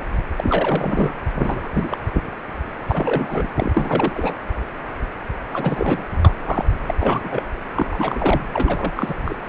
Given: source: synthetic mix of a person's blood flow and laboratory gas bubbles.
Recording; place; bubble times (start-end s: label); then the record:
Doppler ultrasound of blood flow; precordium
0.36-1.18 s: bubbles
1.37-1.68 s: bubbles
1.74-1.97 s: bubbles
2.87-3.48 s: bubbles
3.56-4.34 s: bubbles
5.52-6.08 s: bubbles
6.25-6.34 s: bubbles
6.45-6.66 s: bubbles
6.88-6.94 s: bubbles
6.99-7.21 s: bubbles
7.24-7.29 s: bubbles
7.31-7.43 s: bubbles
7.76-8.42 s: bubbles
8.54-9.15 s: bubbles
9.24-9.36 s: bubbles
From the record:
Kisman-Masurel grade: 332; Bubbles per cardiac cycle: rolling drumbeat, 9 or more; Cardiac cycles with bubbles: 50 to 99%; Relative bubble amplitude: moderate (0.250 to 0.450); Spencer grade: 3 (all of the cardiac periods contain showers or single bubble signals, but not dominating or overriding the cardiac motion signals); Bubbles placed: anywhere in the cardiac cycle